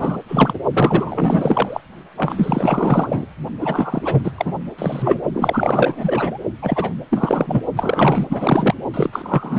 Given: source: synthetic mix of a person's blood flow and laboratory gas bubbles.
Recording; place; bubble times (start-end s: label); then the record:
Doppler ultrasound of blood flow; precordium
0.00-0.17 s: bubbles
0.28-0.59 s: bubbles
0.74-1.81 s: bubbles
2.17-3.26 s: bubbles
3.58-4.32 s: bubbles
4.38-4.52 s: bubbles
4.78-5.20 s: bubbles
5.33-6.38 s: bubbles
6.62-6.93 s: bubbles
7.10-7.63 s: bubbles
7.76-8.75 s: bubbles
8.94-9.59 s: bubbles
From the record:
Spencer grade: 4 (maximum detectable bubble signal sounding continuously throughout systole and diastole of every cardiac period, and overriding the amplitude of the normal cardiac signals); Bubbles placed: only in the low amplitude regions of the cardiac cycle